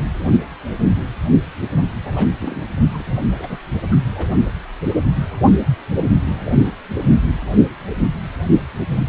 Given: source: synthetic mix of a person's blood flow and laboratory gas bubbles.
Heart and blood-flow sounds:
Doppler ultrasound of blood flow; precordium
2.04-2.12 s: bubbles
2.16-2.28 s: bubbles
2.39-2.65 s: bubbles
2.92-3.21 s: bubbles
3.30-3.57 s: bubbles
3.85-3.95 s: bubbles
4.14-4.33 s: bubbles
From the record:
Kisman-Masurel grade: 221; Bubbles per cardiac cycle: several, 3 to 8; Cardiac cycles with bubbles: 10 to 50%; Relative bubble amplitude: barely perceptible (0.100 to 0.250); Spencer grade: 2 (many but less than half of the cardiac periods contain bubble signals, singularly or in groups); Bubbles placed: only in the low amplitude regions of the cardiac cycle

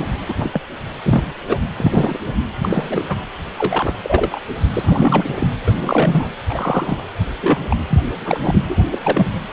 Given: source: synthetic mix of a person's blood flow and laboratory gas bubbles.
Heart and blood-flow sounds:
Doppler ultrasound of blood flow; precordium
0.00-0.06 s: bubbles
0.29-0.34 s: bubbles
0.36-0.51 s: bubbles
0.53-0.60 s: bubbles
1.03-1.35 s: bubbles
1.47-1.60 s: bubbles
1.77-2.20 s: bubbles
2.26-2.34 s: bubbles
2.61-3.04 s: bubbles
3.08-3.18 s: bubbles
3.58-3.94 s: bubbles
4.03-4.41 s: bubbles
4.71-5.48 s: bubbles
5.66-6.30 s: bubbles
6.49-7.04 s: bubbles
7.41-7.58 s: bubbles
7.70-7.77 s: bubbles
7.89-8.02 s: bubbles
8.21-8.65 s: bubbles
8.68-8.76 s: bubbles
8.91-8.98 s: bubbles
9.02-9.33 s: bubbles
From the record:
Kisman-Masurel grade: 243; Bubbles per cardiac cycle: several, 3 to 8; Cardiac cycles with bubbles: 100%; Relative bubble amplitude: loud (0.450 to 0.775); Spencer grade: 3 (all of the cardiac periods contain showers or single bubble signals, but not dominating or overriding the cardiac motion signals); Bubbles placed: anywhere in the cardiac cycle

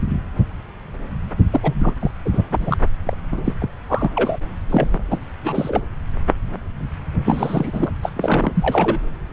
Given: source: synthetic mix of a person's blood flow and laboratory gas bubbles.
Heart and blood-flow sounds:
Doppler ultrasound of blood flow; subclavian vein
1.51-1.94 s: bubbles
2.00-2.11 s: bubbles
2.25-2.29 s: bubbles
2.33-2.43 s: bubbles
2.50-2.77 s: bubbles
3.04-3.17 s: bubbles
3.31-3.41 s: bubbles
3.44-3.52 s: bubbles
3.60-3.69 s: bubbles
3.88-4.11 s: bubbles
4.15-4.39 s: bubbles
4.69-4.99 s: bubbles
5.11-5.17 s: bubbles
5.43-5.82 s: bubbles
7.24-7.92 s: bubbles
8.02-8.10 s: bubbles
8.15-8.99 s: bubbles
From the record:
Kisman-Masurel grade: 332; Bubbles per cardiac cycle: rolling drumbeat, 9 or more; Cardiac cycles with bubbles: 50 to 99%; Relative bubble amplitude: moderate (0.250 to 0.450); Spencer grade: 3 (all of the cardiac periods contain showers or single bubble signals, but not dominating or overriding the cardiac motion signals); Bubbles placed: anywhere in the cardiac cycle

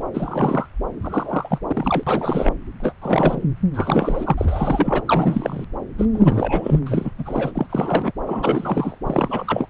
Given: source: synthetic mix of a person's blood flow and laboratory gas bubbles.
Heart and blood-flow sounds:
Doppler ultrasound of blood flow; subclavian vein
0.13-0.68 s: bubbles
1.02-1.59 s: bubbles
1.67-2.03 s: bubbles
2.06-2.53 s: bubbles
2.80-2.93 s: bubbles
3.01-3.42 s: bubbles
3.73-4.34 s: bubbles
4.38-5.02 s: bubbles
5.05-5.64 s: bubbles
5.98-6.05 s: bubbles
6.14-6.79 s: bubbles
6.85-7.12 s: bubbles
7.18-7.51 s: bubbles
7.54-7.67 s: bubbles
7.69-8.12 s: bubbles
8.25-8.98 s: bubbles
9.06-9.66 s: bubbles
From the record:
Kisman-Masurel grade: 343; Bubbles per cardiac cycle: rolling drumbeat, 9 or more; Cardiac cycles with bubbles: 100%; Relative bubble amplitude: loud (0.450 to 0.775); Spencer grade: 3 (all of the cardiac periods contain showers or single bubble signals, but not dominating or overriding the cardiac motion signals); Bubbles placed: anywhere in the cardiac cycle

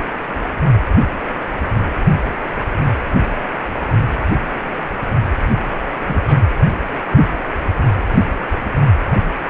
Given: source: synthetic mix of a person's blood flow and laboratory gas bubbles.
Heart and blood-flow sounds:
Doppler ultrasound of blood flow; precordium
6.06-6.42 s: bubbles
From the record:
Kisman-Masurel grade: 211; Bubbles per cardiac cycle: several, 3 to 8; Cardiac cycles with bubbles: 1 to 10%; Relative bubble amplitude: barely perceptible (0.100 to 0.250); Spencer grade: 1 (occasional bubble signal discernible with the cardiac motion signal, with majority of cardiac periods free of bubbles); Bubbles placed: anywhere in the cardiac cycle

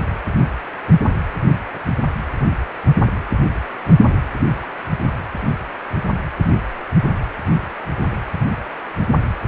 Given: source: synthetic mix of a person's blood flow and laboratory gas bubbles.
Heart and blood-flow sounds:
Doppler ultrasound of blood flow; precordium
no bubbles
From the record:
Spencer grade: 0 (complete lack of bubble signals)

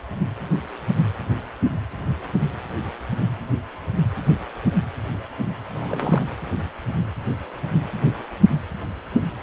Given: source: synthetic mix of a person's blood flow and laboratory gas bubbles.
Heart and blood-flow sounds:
Doppler ultrasound of blood flow; precordium
5.70-6.27 s: bubbles
From the record:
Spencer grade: 1 (occasional bubble signal discernible with the cardiac motion signal, with majority of cardiac periods free of bubbles); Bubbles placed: anywhere in the cardiac cycle

